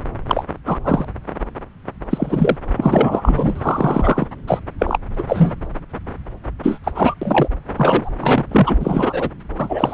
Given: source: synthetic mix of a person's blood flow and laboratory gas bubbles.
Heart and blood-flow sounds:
Doppler ultrasound of blood flow; subclavian vein
0.27-0.44 s: bubbles
0.66-0.78 s: bubbles
0.83-1.06 s: bubbles
2.10-2.56 s: bubbles
2.77-4.27 s: bubbles
4.47-4.59 s: bubbles
4.79-4.97 s: bubbles
5.14-5.25 s: bubbles
5.27-5.54 s: bubbles
6.63-6.79 s: bubbles
6.83-6.92 s: bubbles
6.94-7.14 s: bubbles
7.21-7.48 s: bubbles
7.77-8.16 s: bubbles
8.20-8.45 s: bubbles
8.51-8.76 s: bubbles
8.79-9.29 s: bubbles
9.58-9.94 s: bubbles
From the record:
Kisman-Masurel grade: 233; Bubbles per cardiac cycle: several, 3 to 8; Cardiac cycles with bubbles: 50 to 99%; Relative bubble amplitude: loud (0.450 to 0.775); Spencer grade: 3 (all of the cardiac periods contain showers or single bubble signals, but not dominating or overriding the cardiac motion signals); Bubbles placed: anywhere in the cardiac cycle

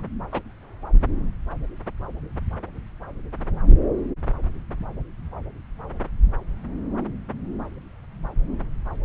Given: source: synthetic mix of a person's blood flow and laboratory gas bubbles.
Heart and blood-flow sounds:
Doppler ultrasound of blood flow; subclavian vein
0.00-0.03 s: bubbles
0.32-0.41 s: bubbles
From the record:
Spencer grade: 1 (occasional bubble signal discernible with the cardiac motion signal, with majority of cardiac periods free of bubbles); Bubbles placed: anywhere in the cardiac cycle

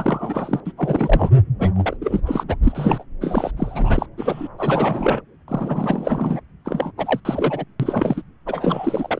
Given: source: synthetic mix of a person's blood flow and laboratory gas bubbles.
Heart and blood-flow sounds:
Doppler ultrasound of blood flow; subclavian vein
0.00-0.60 s: bubbles
0.65-0.72 s: bubbles
0.77-1.30 s: bubbles
1.59-1.70 s: bubbles
1.76-1.96 s: bubbles
2.01-2.21 s: bubbles
2.25-2.44 s: bubbles
2.48-2.56 s: bubbles
2.63-3.04 s: bubbles
3.21-3.51 s: bubbles
3.56-4.06 s: bubbles
4.18-4.48 s: bubbles
4.58-5.22 s: bubbles
5.48-6.41 s: bubbles
6.65-6.92 s: bubbles
6.98-7.20 s: bubbles
7.25-7.65 s: bubbles
7.80-8.21 s: bubbles
8.46-9.20 s: bubbles
From the record:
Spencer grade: 3 (all of the cardiac periods contain showers or single bubble signals, but not dominating or overriding the cardiac motion signals); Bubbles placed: anywhere in the cardiac cycle

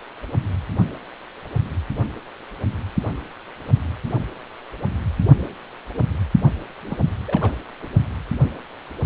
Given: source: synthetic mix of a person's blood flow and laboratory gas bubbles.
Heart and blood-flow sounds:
Doppler ultrasound of blood flow; precordium
6.83-6.97 s: bubbles
7.25-7.52 s: bubbles
7.82-7.88 s: bubbles
From the record:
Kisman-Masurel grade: 221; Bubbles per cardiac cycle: several, 3 to 8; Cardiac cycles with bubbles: 10 to 50%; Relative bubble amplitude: barely perceptible (0.100 to 0.250); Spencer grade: 2 (many but less than half of the cardiac periods contain bubble signals, singularly or in groups); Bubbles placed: only in the low amplitude regions of the cardiac cycle

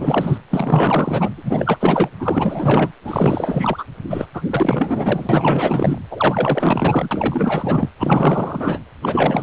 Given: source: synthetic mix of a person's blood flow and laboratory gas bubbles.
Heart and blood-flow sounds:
Doppler ultrasound of blood flow; precordium
0.00-0.38 s: bubbles
0.50-1.29 s: bubbles
1.34-2.10 s: bubbles
2.19-2.92 s: bubbles
3.04-3.85 s: bubbles
4.09-4.26 s: bubbles
4.33-4.42 s: bubbles
4.50-5.99 s: bubbles
6.11-7.08 s: bubbles
7.11-7.89 s: bubbles
7.99-8.79 s: bubbles
9.02-9.42 s: bubbles
From the record:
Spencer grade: 4 (maximum detectable bubble signal sounding continuously throughout systole and diastole of every cardiac period, and overriding the amplitude of the normal cardiac signals); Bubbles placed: anywhere in the cardiac cycle

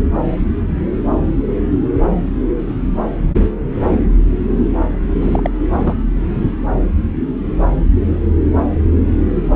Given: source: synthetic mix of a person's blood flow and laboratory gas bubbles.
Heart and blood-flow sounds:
Doppler ultrasound of blood flow; subclavian vein
5.21-5.50 s: bubbles
5.74-5.95 s: bubbles
From the record:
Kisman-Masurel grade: 212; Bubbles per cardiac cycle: several, 3 to 8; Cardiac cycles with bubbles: 1 to 10%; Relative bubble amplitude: moderate (0.250 to 0.450); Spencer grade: 1 (occasional bubble signal discernible with the cardiac motion signal, with majority of cardiac periods free of bubbles); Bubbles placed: anywhere in the cardiac cycle

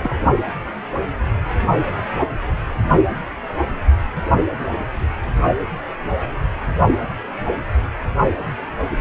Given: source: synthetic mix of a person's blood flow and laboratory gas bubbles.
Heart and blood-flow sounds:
Doppler ultrasound of blood flow; precordium
0.02-0.15 s: bubbles
From the record:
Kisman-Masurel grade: 212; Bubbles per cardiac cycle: several, 3 to 8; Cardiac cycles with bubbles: 1 to 10%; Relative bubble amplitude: moderate (0.250 to 0.450); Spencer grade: 1 (occasional bubble signal discernible with the cardiac motion signal, with majority of cardiac periods free of bubbles); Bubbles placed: only in the low amplitude regions of the cardiac cycle

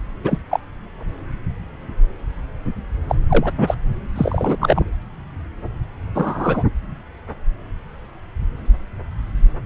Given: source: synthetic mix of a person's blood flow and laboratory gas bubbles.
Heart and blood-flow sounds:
Doppler ultrasound of blood flow; subclavian vein
0.23-0.38 s: bubbles
0.50-0.60 s: bubbles
3.09-3.15 s: bubbles
3.29-3.52 s: bubbles
3.58-3.75 s: bubbles
4.16-4.57 s: bubbles
4.60-4.85 s: bubbles
6.15-6.63 s: bubbles
From the record:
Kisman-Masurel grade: 223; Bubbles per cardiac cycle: several, 3 to 8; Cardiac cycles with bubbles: 10 to 50%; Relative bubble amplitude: loud (0.450 to 0.775); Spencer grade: 2 (many but less than half of the cardiac periods contain bubble signals, singularly or in groups); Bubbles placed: anywhere in the cardiac cycle

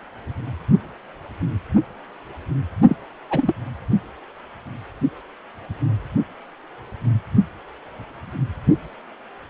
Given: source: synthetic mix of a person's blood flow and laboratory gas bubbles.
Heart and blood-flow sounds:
Doppler ultrasound of blood flow; precordium
2.88-2.97 s: bubbles
3.30-3.53 s: bubbles
From the record:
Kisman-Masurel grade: 212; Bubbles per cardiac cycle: several, 3 to 8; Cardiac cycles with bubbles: 1 to 10%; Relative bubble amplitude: moderate (0.250 to 0.450); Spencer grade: 1 (occasional bubble signal discernible with the cardiac motion signal, with majority of cardiac periods free of bubbles); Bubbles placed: only in the low amplitude regions of the cardiac cycle

